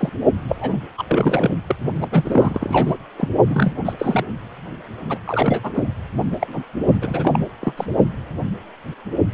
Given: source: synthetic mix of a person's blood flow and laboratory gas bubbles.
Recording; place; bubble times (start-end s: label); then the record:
Doppler ultrasound of blood flow; precordium
0.00-0.09 s: bubbles
0.48-0.79 s: bubbles
0.97-1.04 s: bubbles
1.07-1.56 s: bubbles
1.67-1.76 s: bubbles
2.02-2.07 s: bubbles
2.11-2.96 s: bubbles
3.17-3.29 s: bubbles
3.48-3.73 s: bubbles
3.84-3.93 s: bubbles
3.99-4.25 s: bubbles
5.08-5.18 s: bubbles
5.26-5.61 s: bubbles
5.63-5.83 s: bubbles
6.31-6.37 s: bubbles
6.41-6.63 s: bubbles
6.86-6.95 s: bubbles
7.01-7.39 s: bubbles
7.60-7.73 s: bubbles
7.76-7.86 s: bubbles
From the record:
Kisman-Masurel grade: 332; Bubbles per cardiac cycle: rolling drumbeat, 9 or more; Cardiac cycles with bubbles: 50 to 99%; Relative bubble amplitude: moderate (0.250 to 0.450); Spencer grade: 3 (all of the cardiac periods contain showers or single bubble signals, but not dominating or overriding the cardiac motion signals); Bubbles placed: only in the low amplitude regions of the cardiac cycle